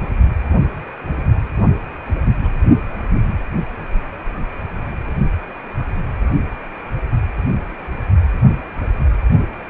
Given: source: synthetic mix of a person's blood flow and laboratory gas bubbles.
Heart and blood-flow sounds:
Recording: Doppler ultrasound of blood flow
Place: precordium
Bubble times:
2.43-2.50 s: bubbles
From the record:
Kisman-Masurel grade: 111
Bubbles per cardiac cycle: 1 to 2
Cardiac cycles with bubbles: 1 to 10%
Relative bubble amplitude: barely perceptible (0.100 to 0.250)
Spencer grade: 1 (occasional bubble signal discernible with the cardiac motion signal, with majority of cardiac periods free of bubbles)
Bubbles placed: only in the low amplitude regions of the cardiac cycle

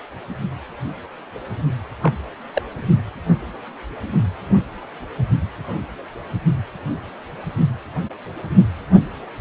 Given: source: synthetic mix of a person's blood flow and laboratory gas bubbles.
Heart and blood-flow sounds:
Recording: Doppler ultrasound of blood flow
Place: precordium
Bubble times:
2.03-2.13 s: bubbles
2.54-2.62 s: bubbles
From the record:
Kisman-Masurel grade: 122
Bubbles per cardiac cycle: 1 to 2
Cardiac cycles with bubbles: 10 to 50%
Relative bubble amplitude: moderate (0.250 to 0.450)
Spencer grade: 2 (many but less than half of the cardiac periods contain bubble signals, singularly or in groups)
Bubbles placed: only in the low amplitude regions of the cardiac cycle

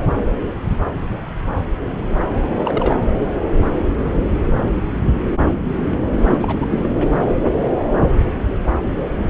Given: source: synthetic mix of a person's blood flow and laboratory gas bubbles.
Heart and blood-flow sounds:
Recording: Doppler ultrasound of blood flow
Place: subclavian vein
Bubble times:
2.54-2.98 s: bubbles
6.27-6.89 s: bubbles
From the record:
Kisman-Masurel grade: 222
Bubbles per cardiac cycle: several, 3 to 8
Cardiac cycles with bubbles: 10 to 50%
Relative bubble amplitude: moderate (0.250 to 0.450)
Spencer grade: 2 (many but less than half of the cardiac periods contain bubble signals, singularly or in groups)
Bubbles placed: anywhere in the cardiac cycle

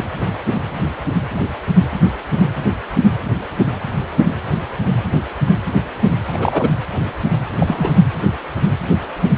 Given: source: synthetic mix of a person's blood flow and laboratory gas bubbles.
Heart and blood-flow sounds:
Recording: Doppler ultrasound of blood flow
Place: precordium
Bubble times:
6.28-6.70 s: bubbles
7.58-7.94 s: bubbles
From the record:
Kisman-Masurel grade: 212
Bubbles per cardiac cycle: several, 3 to 8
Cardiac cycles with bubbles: 1 to 10%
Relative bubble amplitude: moderate (0.250 to 0.450)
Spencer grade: 1 (occasional bubble signal discernible with the cardiac motion signal, with majority of cardiac periods free of bubbles)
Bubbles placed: anywhere in the cardiac cycle

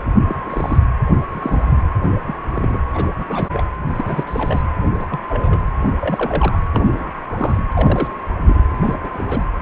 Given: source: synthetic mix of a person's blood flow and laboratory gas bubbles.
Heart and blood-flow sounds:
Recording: Doppler ultrasound of blood flow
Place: precordium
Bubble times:
0.27-0.35 s: bubbles
0.46-0.78 s: bubbles
1.31-1.83 s: bubbles
2.03-2.19 s: bubbles
2.27-2.35 s: bubbles
2.54-2.79 s: bubbles
2.93-3.10 s: bubbles
3.17-3.25 s: bubbles
3.29-3.48 s: bubbles
3.52-3.63 s: bubbles
3.88-4.24 s: bubbles
4.27-4.62 s: bubbles
4.94-5.06 s: bubbles
5.10-5.19 s: bubbles
5.29-5.61 s: bubbles
6.00-6.60 s: bubbles
6.74-7.12 s: bubbles
7.32-7.73 s: bubbles
7.75-8.07 s: bubbles
8.46-8.65 s: bubbles
8.80-9.10 s: bubbles
9.13-9.45 s: bubbles
From the record:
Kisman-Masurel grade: 232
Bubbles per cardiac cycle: several, 3 to 8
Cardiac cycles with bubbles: 50 to 99%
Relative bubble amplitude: moderate (0.250 to 0.450)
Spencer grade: 3 (all of the cardiac periods contain showers or single bubble signals, but not dominating or overriding the cardiac motion signals)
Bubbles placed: anywhere in the cardiac cycle

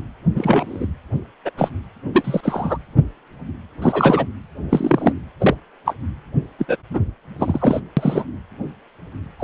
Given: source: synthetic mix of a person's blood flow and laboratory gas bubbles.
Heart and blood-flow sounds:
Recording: Doppler ultrasound of blood flow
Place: precordium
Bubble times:
0.35-0.87 s: bubbles
1.45-1.50 s: bubbles
1.57-1.70 s: bubbles
2.14-2.78 s: bubbles
3.81-4.26 s: bubbles
4.71-5.12 s: bubbles
5.40-5.55 s: bubbles
5.85-5.94 s: bubbles
6.58-6.65 s: bubbles
6.68-6.77 s: bubbles
6.90-7.00 s: bubbles
7.38-7.80 s: bubbles
7.96-8.24 s: bubbles
9.39-9.44 s: bubbles
From the record:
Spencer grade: 3 (all of the cardiac periods contain showers or single bubble signals, but not dominating or overriding the cardiac motion signals)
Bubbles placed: anywhere in the cardiac cycle

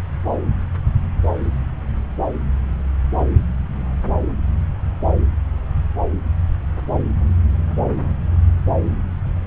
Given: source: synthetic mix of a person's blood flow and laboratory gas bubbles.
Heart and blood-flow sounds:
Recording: Doppler ultrasound of blood flow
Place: subclavian vein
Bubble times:
no bubbles
From the record:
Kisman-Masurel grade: 000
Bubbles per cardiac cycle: 0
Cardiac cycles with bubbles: 0%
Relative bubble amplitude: no bubbles discernible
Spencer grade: 0 (complete lack of bubble signals)

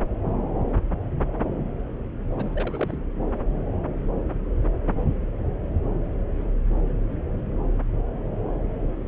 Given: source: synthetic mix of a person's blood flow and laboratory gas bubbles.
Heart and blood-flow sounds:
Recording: Doppler ultrasound of blood flow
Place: subclavian vein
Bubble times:
2.36-2.97 s: bubbles
From the record:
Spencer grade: 1 (occasional bubble signal discernible with the cardiac motion signal, with majority of cardiac periods free of bubbles)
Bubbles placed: anywhere in the cardiac cycle

